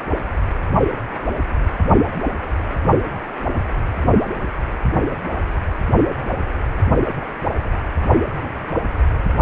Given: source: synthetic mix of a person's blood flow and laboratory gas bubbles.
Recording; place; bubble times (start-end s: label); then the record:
Doppler ultrasound of blood flow; precordium
no bubbles
From the record:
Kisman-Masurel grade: 000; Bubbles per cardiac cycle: 0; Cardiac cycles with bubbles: 0%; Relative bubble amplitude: no bubbles discernible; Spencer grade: 0 (complete lack of bubble signals)